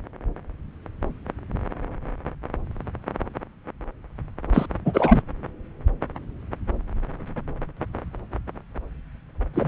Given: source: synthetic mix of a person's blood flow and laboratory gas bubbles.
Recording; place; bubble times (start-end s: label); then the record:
Doppler ultrasound of blood flow; subclavian vein
4.54-4.66 s: bubbles
4.85-5.22 s: bubbles
9.54-9.68 s: bubbles
From the record:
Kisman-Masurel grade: 223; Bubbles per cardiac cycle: several, 3 to 8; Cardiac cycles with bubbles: 10 to 50%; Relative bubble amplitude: loud (0.450 to 0.775); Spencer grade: 2 (many but less than half of the cardiac periods contain bubble signals, singularly or in groups); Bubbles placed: anywhere in the cardiac cycle